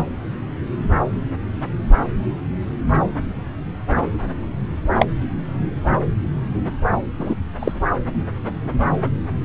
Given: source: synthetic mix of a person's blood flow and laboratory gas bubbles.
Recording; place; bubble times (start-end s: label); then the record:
Doppler ultrasound of blood flow; subclavian vein
0.00-0.03 s: bubbles
4.98-5.05 s: bubbles
7.19-7.35 s: bubbles
7.59-7.71 s: bubbles
From the record:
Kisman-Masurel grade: 123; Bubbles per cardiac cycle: 1 to 2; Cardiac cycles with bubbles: 10 to 50%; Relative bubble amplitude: loud (0.450 to 0.775); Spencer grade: 2 (many but less than half of the cardiac periods contain bubble signals, singularly or in groups); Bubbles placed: anywhere in the cardiac cycle